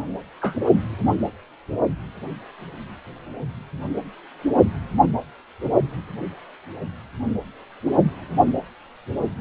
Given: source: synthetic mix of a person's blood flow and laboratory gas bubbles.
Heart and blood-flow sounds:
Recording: Doppler ultrasound of blood flow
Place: precordium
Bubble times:
0.41-0.56 s: bubbles
From the record:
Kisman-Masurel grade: 222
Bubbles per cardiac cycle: several, 3 to 8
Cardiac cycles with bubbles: 10 to 50%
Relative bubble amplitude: moderate (0.250 to 0.450)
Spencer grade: 2 (many but less than half of the cardiac periods contain bubble signals, singularly or in groups)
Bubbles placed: only in the low amplitude regions of the cardiac cycle

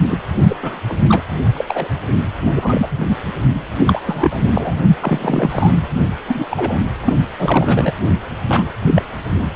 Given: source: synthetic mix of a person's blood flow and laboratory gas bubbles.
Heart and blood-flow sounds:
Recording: Doppler ultrasound of blood flow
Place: precordium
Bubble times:
0.10-0.17 s: bubbles
0.48-0.57 s: bubbles
0.62-0.80 s: bubbles
0.89-0.96 s: bubbles
1.09-1.23 s: bubbles
1.55-1.65 s: bubbles
1.68-1.89 s: bubbles
2.56-2.87 s: bubbles
2.91-2.99 s: bubbles
3.09-3.15 s: bubbles
3.87-4.01 s: bubbles
4.04-4.75 s: bubbles
5.00-5.87 s: bubbles
5.97-6.06 s: bubbles
6.28-6.45 s: bubbles
6.50-6.82 s: bubbles
7.06-7.13 s: bubbles
7.38-7.93 s: bubbles
8.49-8.63 s: bubbles
8.87-9.04 s: bubbles
From the record:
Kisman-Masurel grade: 233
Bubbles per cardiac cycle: several, 3 to 8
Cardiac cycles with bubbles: 50 to 99%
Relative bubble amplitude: loud (0.450 to 0.775)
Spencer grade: 3 (all of the cardiac periods contain showers or single bubble signals, but not dominating or overriding the cardiac motion signals)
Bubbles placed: anywhere in the cardiac cycle

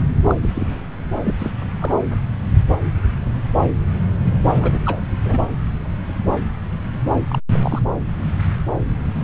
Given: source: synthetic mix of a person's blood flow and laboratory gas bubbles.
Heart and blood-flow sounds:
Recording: Doppler ultrasound of blood flow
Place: subclavian vein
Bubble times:
0.28-0.35 s: bubbles
0.43-0.50 s: bubbles
0.55-0.80 s: bubbles
1.23-1.35 s: bubbles
1.38-1.51 s: bubbles
1.80-1.92 s: bubbles
4.46-4.81 s: bubbles
4.86-5.01 s: bubbles
5.25-5.42 s: bubbles
7.28-7.39 s: bubbles
7.52-7.80 s: bubbles
From the record:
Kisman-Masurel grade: 222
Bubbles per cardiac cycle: several, 3 to 8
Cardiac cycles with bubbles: 10 to 50%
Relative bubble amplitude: moderate (0.250 to 0.450)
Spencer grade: 2 (many but less than half of the cardiac periods contain bubble signals, singularly or in groups)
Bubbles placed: anywhere in the cardiac cycle

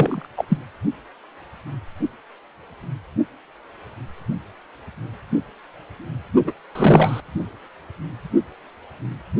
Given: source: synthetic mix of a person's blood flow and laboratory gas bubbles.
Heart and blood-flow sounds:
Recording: Doppler ultrasound of blood flow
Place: precordium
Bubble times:
0.00-0.26 s: bubbles
0.36-0.45 s: bubbles
0.48-0.57 s: bubbles
6.43-6.53 s: bubbles
6.75-7.21 s: bubbles
From the record:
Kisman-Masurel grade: 223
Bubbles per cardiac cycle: several, 3 to 8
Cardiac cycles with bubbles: 10 to 50%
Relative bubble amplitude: loud (0.450 to 0.775)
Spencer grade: 2 (many but less than half of the cardiac periods contain bubble signals, singularly or in groups)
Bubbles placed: only in the low amplitude regions of the cardiac cycle

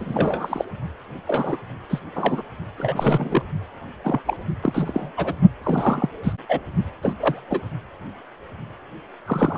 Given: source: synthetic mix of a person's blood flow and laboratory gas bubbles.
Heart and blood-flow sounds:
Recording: Doppler ultrasound of blood flow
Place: precordium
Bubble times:
0.00-0.65 s: bubbles
1.25-1.57 s: bubbles
1.90-1.99 s: bubbles
2.15-2.42 s: bubbles
2.78-3.43 s: bubbles
4.04-4.20 s: bubbles
4.25-4.37 s: bubbles
4.61-5.10 s: bubbles
5.17-5.33 s: bubbles
5.63-6.09 s: bubbles
6.23-6.32 s: bubbles
6.48-6.60 s: bubbles
7.02-7.13 s: bubbles
7.18-7.40 s: bubbles
7.50-7.61 s: bubbles
9.26-9.58 s: bubbles
From the record:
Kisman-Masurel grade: 232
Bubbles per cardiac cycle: several, 3 to 8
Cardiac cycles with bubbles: 50 to 99%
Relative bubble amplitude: moderate (0.250 to 0.450)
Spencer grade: 3 (all of the cardiac periods contain showers or single bubble signals, but not dominating or overriding the cardiac motion signals)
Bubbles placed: only in the low amplitude regions of the cardiac cycle

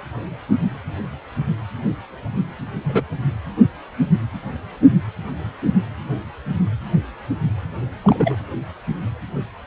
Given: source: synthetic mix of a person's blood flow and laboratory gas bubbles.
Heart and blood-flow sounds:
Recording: Doppler ultrasound of blood flow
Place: precordium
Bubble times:
2.84-3.04 s: bubbles
8.04-8.36 s: bubbles
From the record:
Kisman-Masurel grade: 122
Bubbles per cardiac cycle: 1 to 2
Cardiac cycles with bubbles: 10 to 50%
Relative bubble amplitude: moderate (0.250 to 0.450)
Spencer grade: 2 (many but less than half of the cardiac periods contain bubble signals, singularly or in groups)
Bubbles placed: anywhere in the cardiac cycle

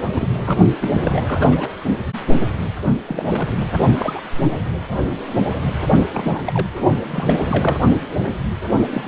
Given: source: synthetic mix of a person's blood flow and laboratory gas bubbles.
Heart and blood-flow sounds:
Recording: Doppler ultrasound of blood flow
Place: precordium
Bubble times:
0.07-0.64 s: bubbles
0.80-0.91 s: bubbles
0.98-1.69 s: bubbles
3.07-3.71 s: bubbles
3.94-4.21 s: bubbles
6.11-6.67 s: bubbles
7.10-7.80 s: bubbles
8.93-9.03 s: bubbles
From the record:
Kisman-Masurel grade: 232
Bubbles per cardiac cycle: several, 3 to 8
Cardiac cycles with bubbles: 50 to 99%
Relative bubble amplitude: moderate (0.250 to 0.450)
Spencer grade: 3 (all of the cardiac periods contain showers or single bubble signals, but not dominating or overriding the cardiac motion signals)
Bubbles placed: only in the low amplitude regions of the cardiac cycle

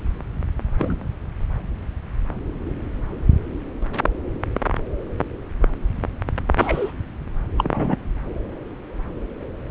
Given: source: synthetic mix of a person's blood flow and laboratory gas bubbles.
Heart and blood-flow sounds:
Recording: Doppler ultrasound of blood flow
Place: subclavian vein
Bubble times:
0.78-0.96 s: bubbles
6.59-6.92 s: bubbles
7.57-7.97 s: bubbles
From the record:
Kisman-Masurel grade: 122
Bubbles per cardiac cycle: 1 to 2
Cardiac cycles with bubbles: 10 to 50%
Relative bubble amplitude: moderate (0.250 to 0.450)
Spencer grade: 2 (many but less than half of the cardiac periods contain bubble signals, singularly or in groups)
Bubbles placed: anywhere in the cardiac cycle

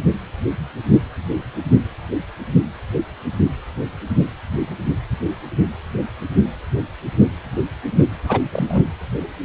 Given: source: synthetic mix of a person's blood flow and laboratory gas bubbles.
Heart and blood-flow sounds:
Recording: Doppler ultrasound of blood flow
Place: precordium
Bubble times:
8.29-8.39 s: bubbles
8.53-8.85 s: bubbles
From the record:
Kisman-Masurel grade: 113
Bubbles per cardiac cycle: 1 to 2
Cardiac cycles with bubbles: 1 to 10%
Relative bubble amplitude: loud (0.450 to 0.775)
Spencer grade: 1 (occasional bubble signal discernible with the cardiac motion signal, with majority of cardiac periods free of bubbles)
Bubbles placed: anywhere in the cardiac cycle

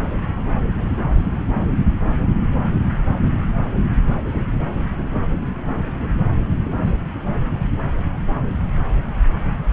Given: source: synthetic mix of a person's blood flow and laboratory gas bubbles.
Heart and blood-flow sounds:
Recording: Doppler ultrasound of blood flow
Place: subclavian vein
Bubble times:
2.38-2.45 s: bubbles
4.31-4.45 s: bubbles
5.95-6.10 s: bubbles
6.61-6.71 s: bubbles
6.80-6.97 s: bubbles
From the record:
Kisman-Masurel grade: 121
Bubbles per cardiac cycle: 1 to 2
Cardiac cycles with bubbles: 10 to 50%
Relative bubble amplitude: barely perceptible (0.100 to 0.250)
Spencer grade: 2 (many but less than half of the cardiac periods contain bubble signals, singularly or in groups)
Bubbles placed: anywhere in the cardiac cycle

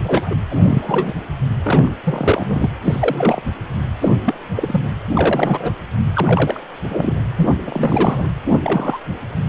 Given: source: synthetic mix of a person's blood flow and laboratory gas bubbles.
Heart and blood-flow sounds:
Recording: Doppler ultrasound of blood flow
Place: precordium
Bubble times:
0.04-0.35 s: bubbles
0.52-0.57 s: bubbles
0.63-1.13 s: bubbles
1.64-1.94 s: bubbles
2.04-2.73 s: bubbles
2.84-3.42 s: bubbles
4.01-4.09 s: bubbles
4.25-4.34 s: bubbles
4.55-4.80 s: bubbles
5.13-5.75 s: bubbles
6.13-6.60 s: bubbles
6.89-7.17 s: bubbles
7.36-7.50 s: bubbles
7.67-8.28 s: bubbles
8.64-9.00 s: bubbles
From the record:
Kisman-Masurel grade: 242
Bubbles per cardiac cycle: several, 3 to 8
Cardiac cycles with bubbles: 100%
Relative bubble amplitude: moderate (0.250 to 0.450)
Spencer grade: 3 (all of the cardiac periods contain showers or single bubble signals, but not dominating or overriding the cardiac motion signals)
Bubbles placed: anywhere in the cardiac cycle

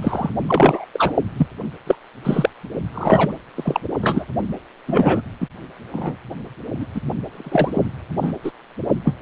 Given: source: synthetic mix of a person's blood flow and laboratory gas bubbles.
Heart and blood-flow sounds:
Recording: Doppler ultrasound of blood flow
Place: precordium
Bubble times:
0.02-0.31 s: bubbles
0.47-0.85 s: bubbles
0.93-1.13 s: bubbles
1.37-1.46 s: bubbles
1.86-1.95 s: bubbles
2.23-2.50 s: bubbles
2.94-3.32 s: bubbles
3.55-3.80 s: bubbles
4.01-4.26 s: bubbles
4.86-5.22 s: bubbles
5.40-5.47 s: bubbles
5.92-6.16 s: bubbles
6.79-6.86 s: bubbles
6.94-7.01 s: bubbles
7.31-7.82 s: bubbles
8.22-8.32 s: bubbles
8.44-8.52 s: bubbles
9.04-9.16 s: bubbles
From the record:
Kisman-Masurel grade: 243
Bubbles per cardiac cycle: several, 3 to 8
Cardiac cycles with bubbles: 100%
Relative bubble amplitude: loud (0.450 to 0.775)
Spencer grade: 3 (all of the cardiac periods contain showers or single bubble signals, but not dominating or overriding the cardiac motion signals)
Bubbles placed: only in the low amplitude regions of the cardiac cycle

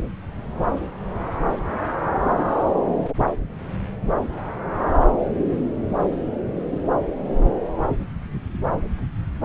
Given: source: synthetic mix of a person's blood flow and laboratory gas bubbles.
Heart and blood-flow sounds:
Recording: Doppler ultrasound of blood flow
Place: subclavian vein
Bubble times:
no bubbles
From the record:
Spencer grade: 0 (complete lack of bubble signals)

